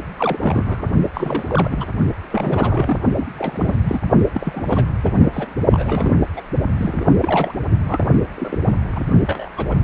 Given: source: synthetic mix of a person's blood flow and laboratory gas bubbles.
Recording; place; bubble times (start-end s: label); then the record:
Doppler ultrasound of blood flow; precordium
0.18-0.91 s: bubbles
1.14-1.87 s: bubbles
2.31-3.00 s: bubbles
3.15-3.27 s: bubbles
3.38-3.77 s: bubbles
3.83-3.99 s: bubbles
4.33-4.85 s: bubbles
5.04-5.11 s: bubbles
5.13-5.47 s: bubbles
5.72-6.15 s: bubbles
6.36-6.42 s: bubbles
6.77-7.05 s: bubbles
7.22-7.55 s: bubbles
7.88-8.06 s: bubbles
8.35-8.58 s: bubbles
8.89-9.09 s: bubbles
9.12-9.48 s: bubbles
9.57-9.67 s: bubbles
9.71-9.75 s: bubbles
From the record:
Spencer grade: 3 (all of the cardiac periods contain showers or single bubble signals, but not dominating or overriding the cardiac motion signals); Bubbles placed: only in the low amplitude regions of the cardiac cycle